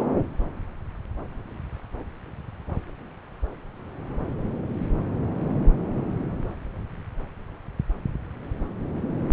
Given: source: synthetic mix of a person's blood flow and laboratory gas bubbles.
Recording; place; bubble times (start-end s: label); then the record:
Doppler ultrasound of blood flow; subclavian vein
no bubbles
From the record:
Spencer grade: 0 (complete lack of bubble signals)